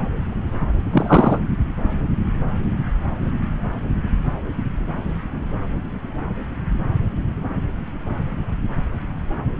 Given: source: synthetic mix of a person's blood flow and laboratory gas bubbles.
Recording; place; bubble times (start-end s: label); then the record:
Doppler ultrasound of blood flow; subclavian vein
0.92-1.39 s: bubbles
From the record:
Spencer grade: 1 (occasional bubble signal discernible with the cardiac motion signal, with majority of cardiac periods free of bubbles); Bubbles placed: anywhere in the cardiac cycle